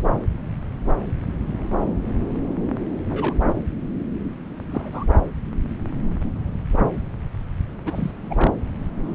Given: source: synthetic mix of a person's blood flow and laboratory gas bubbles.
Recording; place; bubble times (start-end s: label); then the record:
Doppler ultrasound of blood flow; subclavian vein
3.08-3.33 s: bubbles
4.71-5.04 s: bubbles
7.85-8.11 s: bubbles
8.29-8.51 s: bubbles
From the record:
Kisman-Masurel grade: 221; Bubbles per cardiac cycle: several, 3 to 8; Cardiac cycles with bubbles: 10 to 50%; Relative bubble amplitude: barely perceptible (0.100 to 0.250); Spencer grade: 2 (many but less than half of the cardiac periods contain bubble signals, singularly or in groups); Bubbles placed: anywhere in the cardiac cycle